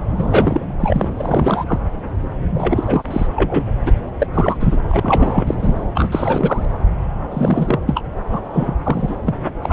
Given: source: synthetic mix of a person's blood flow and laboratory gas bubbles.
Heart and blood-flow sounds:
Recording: Doppler ultrasound of blood flow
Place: subclavian vein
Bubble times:
0.16-0.64 s: bubbles
0.80-1.09 s: bubbles
1.16-1.65 s: bubbles
1.67-1.81 s: bubbles
2.54-3.27 s: bubbles
3.35-3.65 s: bubbles
3.85-3.92 s: bubbles
4.19-4.26 s: bubbles
4.33-4.57 s: bubbles
4.60-4.77 s: bubbles
4.88-5.54 s: bubbles
5.59-5.87 s: bubbles
5.94-6.65 s: bubbles
7.30-7.79 s: bubbles
7.87-8.03 s: bubbles
8.30-8.39 s: bubbles
8.53-8.75 s: bubbles
8.85-9.17 s: bubbles
9.26-9.34 s: bubbles
9.62-9.73 s: bubbles
From the record:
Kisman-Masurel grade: 333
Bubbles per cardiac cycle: rolling drumbeat, 9 or more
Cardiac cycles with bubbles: 50 to 99%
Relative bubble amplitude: loud (0.450 to 0.775)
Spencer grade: 3 (all of the cardiac periods contain showers or single bubble signals, but not dominating or overriding the cardiac motion signals)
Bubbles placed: anywhere in the cardiac cycle

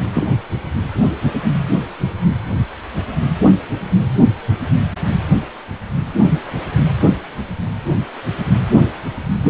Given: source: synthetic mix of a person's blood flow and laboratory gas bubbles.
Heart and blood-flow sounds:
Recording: Doppler ultrasound of blood flow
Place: precordium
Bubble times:
0.14-0.38 s: bubbles
9.43-9.50 s: bubbles
From the record:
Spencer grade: 2 (many but less than half of the cardiac periods contain bubble signals, singularly or in groups)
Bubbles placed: anywhere in the cardiac cycle

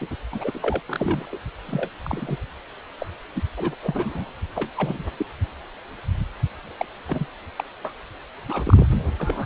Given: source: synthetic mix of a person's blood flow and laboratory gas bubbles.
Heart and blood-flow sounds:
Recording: Doppler ultrasound of blood flow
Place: precordium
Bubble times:
0.00-0.07 s: bubbles
0.11-0.16 s: bubbles
0.33-0.80 s: bubbles
0.85-1.38 s: bubbles
1.66-1.89 s: bubbles
2.02-2.37 s: bubbles
2.98-3.06 s: bubbles
3.35-3.42 s: bubbles
3.56-3.75 s: bubbles
3.82-4.29 s: bubbles
4.54-4.70 s: bubbles
4.76-5.05 s: bubbles
5.18-5.26 s: bubbles
6.78-6.86 s: bubbles
7.07-7.27 s: bubbles
7.57-7.64 s: bubbles
7.85-7.93 s: bubbles
8.48-8.88 s: bubbles
9.18-9.46 s: bubbles
From the record:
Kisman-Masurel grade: 232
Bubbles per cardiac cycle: several, 3 to 8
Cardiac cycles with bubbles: 50 to 99%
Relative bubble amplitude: moderate (0.250 to 0.450)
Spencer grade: 3 (all of the cardiac periods contain showers or single bubble signals, but not dominating or overriding the cardiac motion signals)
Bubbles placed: anywhere in the cardiac cycle

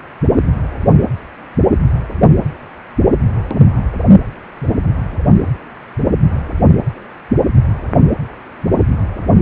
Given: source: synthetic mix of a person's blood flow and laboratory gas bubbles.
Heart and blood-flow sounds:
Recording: Doppler ultrasound of blood flow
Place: precordium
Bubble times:
no bubbles
From the record:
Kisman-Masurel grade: 000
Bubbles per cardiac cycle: 0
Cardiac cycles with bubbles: 0%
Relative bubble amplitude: no bubbles discernible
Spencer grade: 0 (complete lack of bubble signals)

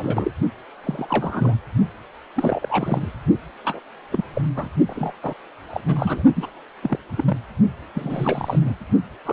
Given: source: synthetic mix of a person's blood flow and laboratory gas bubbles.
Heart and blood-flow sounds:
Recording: Doppler ultrasound of blood flow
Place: precordium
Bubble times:
0.00-0.31 s: bubbles
0.83-1.55 s: bubbles
2.36-3.12 s: bubbles
3.64-3.80 s: bubbles
4.12-4.24 s: bubbles
4.33-4.42 s: bubbles
4.57-4.67 s: bubbles
4.87-5.13 s: bubbles
5.22-5.34 s: bubbles
5.70-5.80 s: bubbles
5.86-6.23 s: bubbles
6.36-6.46 s: bubbles
6.83-6.96 s: bubbles
7.17-7.38 s: bubbles
7.94-8.73 s: bubbles
9.25-9.33 s: bubbles
From the record:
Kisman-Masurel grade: 242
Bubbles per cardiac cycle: several, 3 to 8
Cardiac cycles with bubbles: 100%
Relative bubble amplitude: moderate (0.250 to 0.450)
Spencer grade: 3 (all of the cardiac periods contain showers or single bubble signals, but not dominating or overriding the cardiac motion signals)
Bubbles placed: only in the low amplitude regions of the cardiac cycle

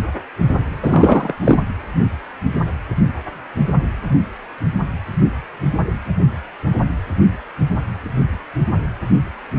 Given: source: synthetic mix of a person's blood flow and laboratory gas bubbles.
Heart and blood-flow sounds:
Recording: Doppler ultrasound of blood flow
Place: precordium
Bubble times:
0.82-1.34 s: bubbles
1.44-1.60 s: bubbles
From the record:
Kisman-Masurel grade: 213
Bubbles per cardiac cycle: several, 3 to 8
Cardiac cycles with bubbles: 1 to 10%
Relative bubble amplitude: loud (0.450 to 0.775)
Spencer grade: 1 (occasional bubble signal discernible with the cardiac motion signal, with majority of cardiac periods free of bubbles)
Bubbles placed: anywhere in the cardiac cycle

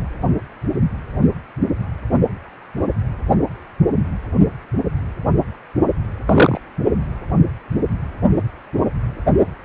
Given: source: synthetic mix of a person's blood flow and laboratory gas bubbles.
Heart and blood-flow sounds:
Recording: Doppler ultrasound of blood flow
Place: precordium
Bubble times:
6.25-6.61 s: bubbles
From the record:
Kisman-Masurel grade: 113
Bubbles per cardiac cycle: 1 to 2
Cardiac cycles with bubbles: 1 to 10%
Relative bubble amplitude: loud (0.450 to 0.775)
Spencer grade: 1 (occasional bubble signal discernible with the cardiac motion signal, with majority of cardiac periods free of bubbles)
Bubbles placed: only in the low amplitude regions of the cardiac cycle

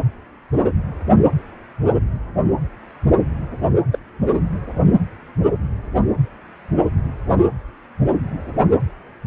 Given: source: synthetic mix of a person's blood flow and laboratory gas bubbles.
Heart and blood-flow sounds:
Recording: Doppler ultrasound of blood flow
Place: precordium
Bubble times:
3.93-3.98 s: bubbles
From the record:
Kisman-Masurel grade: 112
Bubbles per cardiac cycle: 1 to 2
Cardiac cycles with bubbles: 1 to 10%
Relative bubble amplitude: moderate (0.250 to 0.450)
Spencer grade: 1 (occasional bubble signal discernible with the cardiac motion signal, with majority of cardiac periods free of bubbles)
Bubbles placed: anywhere in the cardiac cycle

